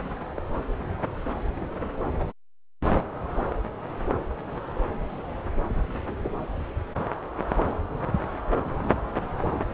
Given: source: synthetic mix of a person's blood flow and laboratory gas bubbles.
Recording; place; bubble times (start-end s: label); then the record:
Doppler ultrasound of blood flow; subclavian vein
0.35-0.42 s: bubbles
From the record:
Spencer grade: 1 (occasional bubble signal discernible with the cardiac motion signal, with majority of cardiac periods free of bubbles); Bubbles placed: anywhere in the cardiac cycle